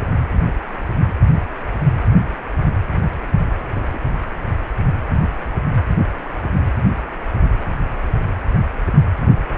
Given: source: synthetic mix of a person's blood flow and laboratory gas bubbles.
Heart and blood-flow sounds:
Doppler ultrasound of blood flow; precordium
3.74-3.99 s: bubbles
From the record:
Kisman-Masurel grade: 111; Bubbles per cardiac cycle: 1 to 2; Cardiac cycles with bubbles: 1 to 10%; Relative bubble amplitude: barely perceptible (0.100 to 0.250); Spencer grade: 1 (occasional bubble signal discernible with the cardiac motion signal, with majority of cardiac periods free of bubbles); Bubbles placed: anywhere in the cardiac cycle

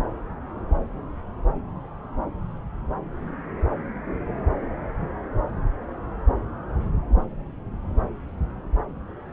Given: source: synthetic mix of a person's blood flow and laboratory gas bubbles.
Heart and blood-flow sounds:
Doppler ultrasound of blood flow; subclavian vein
no bubbles
From the record:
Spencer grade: 0 (complete lack of bubble signals)

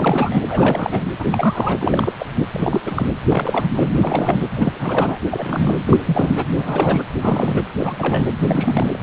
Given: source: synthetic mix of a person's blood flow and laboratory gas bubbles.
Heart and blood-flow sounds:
Doppler ultrasound of blood flow; precordium
0.00-0.42 s: bubbles
0.48-1.04 s: bubbles
1.19-1.77 s: bubbles
1.81-2.13 s: bubbles
2.19-2.27 s: bubbles
2.52-3.10 s: bubbles
3.29-3.69 s: bubbles
3.73-3.89 s: bubbles
3.98-4.48 s: bubbles
4.56-5.19 s: bubbles
5.31-6.45 s: bubbles
6.56-7.03 s: bubbles
7.21-7.62 s: bubbles
7.78-8.31 s: bubbles
8.41-8.97 s: bubbles
From the record:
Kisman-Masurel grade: 342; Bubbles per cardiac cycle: rolling drumbeat, 9 or more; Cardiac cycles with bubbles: 100%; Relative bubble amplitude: moderate (0.250 to 0.450); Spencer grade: 3 (all of the cardiac periods contain showers or single bubble signals, but not dominating or overriding the cardiac motion signals); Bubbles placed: anywhere in the cardiac cycle

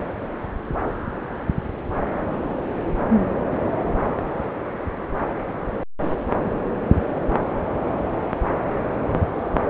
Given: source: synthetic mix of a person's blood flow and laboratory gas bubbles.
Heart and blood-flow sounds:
Doppler ultrasound of blood flow; subclavian vein
no bubbles
From the record:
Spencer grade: 0 (complete lack of bubble signals)

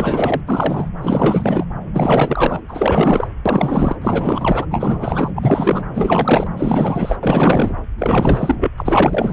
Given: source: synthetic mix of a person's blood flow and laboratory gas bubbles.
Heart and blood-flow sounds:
Doppler ultrasound of blood flow; subclavian vein
0.00-0.41 s: bubbles
0.48-0.90 s: bubbles
1.01-1.65 s: bubbles
1.93-2.62 s: bubbles
2.68-3.28 s: bubbles
3.46-3.96 s: bubbles
4.01-4.65 s: bubbles
4.70-5.30 s: bubbles
5.35-5.85 s: bubbles
5.94-6.47 s: bubbles
6.57-7.16 s: bubbles
7.22-7.73 s: bubbles
7.98-8.71 s: bubbles
8.77-9.33 s: bubbles
From the record:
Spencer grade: 4 (maximum detectable bubble signal sounding continuously throughout systole and diastole of every cardiac period, and overriding the amplitude of the normal cardiac signals); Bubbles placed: anywhere in the cardiac cycle

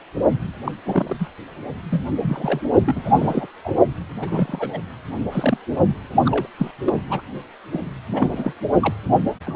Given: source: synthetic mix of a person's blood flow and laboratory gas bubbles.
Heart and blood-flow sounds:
Doppler ultrasound of blood flow; precordium
0.64-0.72 s: bubbles
0.85-1.16 s: bubbles
1.18-1.27 s: bubbles
1.90-2.02 s: bubbles
2.22-2.61 s: bubbles
2.85-3.46 s: bubbles
3.64-3.71 s: bubbles
4.18-4.78 s: bubbles
5.31-5.57 s: bubbles
6.25-6.47 s: bubbles
6.58-6.71 s: bubbles
6.84-6.93 s: bubbles
7.09-7.22 s: bubbles
7.71-7.88 s: bubbles
8.13-8.53 s: bubbles
8.80-8.94 s: bubbles
9.46-9.55 s: bubbles
From the record:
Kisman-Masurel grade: 242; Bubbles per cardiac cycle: several, 3 to 8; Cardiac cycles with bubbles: 100%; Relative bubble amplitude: moderate (0.250 to 0.450); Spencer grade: 3 (all of the cardiac periods contain showers or single bubble signals, but not dominating or overriding the cardiac motion signals); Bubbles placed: only in the low amplitude regions of the cardiac cycle

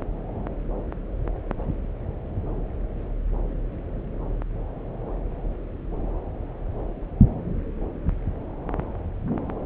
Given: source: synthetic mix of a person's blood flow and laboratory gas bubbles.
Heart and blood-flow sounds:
Doppler ultrasound of blood flow; subclavian vein
no bubbles
From the record:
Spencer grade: 0 (complete lack of bubble signals)

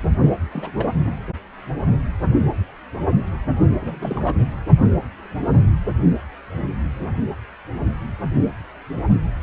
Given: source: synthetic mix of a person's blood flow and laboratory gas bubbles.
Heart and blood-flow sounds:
Doppler ultrasound of blood flow; precordium
0.26-0.34 s: bubbles
0.51-0.71 s: bubbles
0.75-0.99 s: bubbles
1.05-1.19 s: bubbles
3.79-4.36 s: bubbles
From the record:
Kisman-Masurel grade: 211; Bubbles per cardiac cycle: several, 3 to 8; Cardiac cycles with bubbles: 1 to 10%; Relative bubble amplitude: barely perceptible (0.100 to 0.250); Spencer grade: 1 (occasional bubble signal discernible with the cardiac motion signal, with majority of cardiac periods free of bubbles); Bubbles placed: anywhere in the cardiac cycle

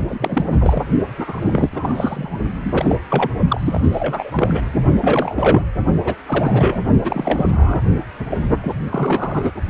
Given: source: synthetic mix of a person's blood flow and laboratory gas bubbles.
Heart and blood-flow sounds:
Doppler ultrasound of blood flow; precordium
0.08-0.46 s: bubbles
0.52-0.84 s: bubbles
1.18-2.38 s: bubbles
2.64-2.98 s: bubbles
3.10-3.30 s: bubbles
3.48-4.61 s: bubbles
5.01-5.62 s: bubbles
6.04-6.15 s: bubbles
6.27-6.81 s: bubbles
7.04-7.82 s: bubbles
8.29-8.38 s: bubbles
8.61-8.73 s: bubbles
8.90-9.52 s: bubbles
From the record:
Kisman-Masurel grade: 342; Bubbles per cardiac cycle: rolling drumbeat, 9 or more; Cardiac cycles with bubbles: 100%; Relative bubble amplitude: moderate (0.250 to 0.450); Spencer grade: 3 (all of the cardiac periods contain showers or single bubble signals, but not dominating or overriding the cardiac motion signals); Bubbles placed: only in the low amplitude regions of the cardiac cycle

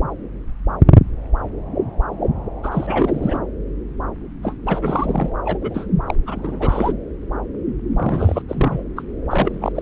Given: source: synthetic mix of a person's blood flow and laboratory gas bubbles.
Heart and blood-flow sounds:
Doppler ultrasound of blood flow; subclavian vein
2.63-3.38 s: bubbles
4.42-4.55 s: bubbles
4.66-5.29 s: bubbles
5.45-5.58 s: bubbles
5.61-5.87 s: bubbles
6.06-6.15 s: bubbles
6.26-6.93 s: bubbles
7.96-8.42 s: bubbles
8.48-8.83 s: bubbles
8.96-9.02 s: bubbles
9.29-9.72 s: bubbles
9.74-9.82 s: bubbles
From the record:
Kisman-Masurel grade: 332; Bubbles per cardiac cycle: rolling drumbeat, 9 or more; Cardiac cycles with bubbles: 50 to 99%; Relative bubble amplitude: moderate (0.250 to 0.450); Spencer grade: 3 (all of the cardiac periods contain showers or single bubble signals, but not dominating or overriding the cardiac motion signals); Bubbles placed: anywhere in the cardiac cycle

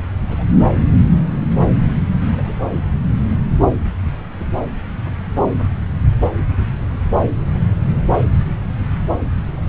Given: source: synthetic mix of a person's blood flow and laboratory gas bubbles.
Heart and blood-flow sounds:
Doppler ultrasound of blood flow; subclavian vein
0.00-0.02 s: bubbles
0.29-0.46 s: bubbles
2.32-2.58 s: bubbles
4.40-4.45 s: bubbles
From the record:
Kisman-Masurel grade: 121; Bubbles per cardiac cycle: 1 to 2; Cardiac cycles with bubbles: 10 to 50%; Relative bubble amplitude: barely perceptible (0.100 to 0.250); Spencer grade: 2 (many but less than half of the cardiac periods contain bubble signals, singularly or in groups); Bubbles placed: anywhere in the cardiac cycle

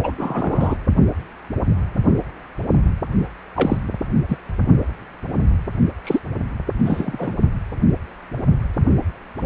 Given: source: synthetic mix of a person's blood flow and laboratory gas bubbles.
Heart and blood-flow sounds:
Doppler ultrasound of blood flow; precordium
0.03-0.11 s: bubbles
0.18-0.77 s: bubbles
3.55-3.77 s: bubbles
4.29-4.38 s: bubbles
6.04-6.20 s: bubbles
6.85-7.36 s: bubbles
From the record:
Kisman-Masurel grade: 233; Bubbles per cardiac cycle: several, 3 to 8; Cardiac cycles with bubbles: 50 to 99%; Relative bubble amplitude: loud (0.450 to 0.775); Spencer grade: 3 (all of the cardiac periods contain showers or single bubble signals, but not dominating or overriding the cardiac motion signals); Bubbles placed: only in the low amplitude regions of the cardiac cycle

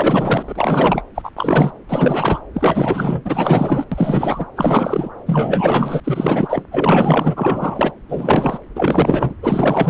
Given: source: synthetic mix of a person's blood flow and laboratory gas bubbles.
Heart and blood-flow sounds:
Doppler ultrasound of blood flow; subclavian vein
0.00-1.02 s: bubbles
1.15-1.30 s: bubbles
1.36-1.71 s: bubbles
1.89-2.40 s: bubbles
2.53-3.21 s: bubbles
3.25-3.84 s: bubbles
3.91-4.47 s: bubbles
4.57-5.09 s: bubbles
5.26-6.00 s: bubbles
6.04-6.62 s: bubbles
6.71-7.91 s: bubbles
8.09-8.59 s: bubbles
8.75-9.35 s: bubbles
9.42-9.89 s: bubbles
From the record:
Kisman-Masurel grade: 444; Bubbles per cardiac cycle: continuous sound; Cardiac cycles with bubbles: 100%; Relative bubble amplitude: maximal (0.775 to 0.999); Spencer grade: 4 (maximum detectable bubble signal sounding continuously throughout systole and diastole of every cardiac period, and overriding the amplitude of the normal cardiac signals); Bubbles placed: anywhere in the cardiac cycle

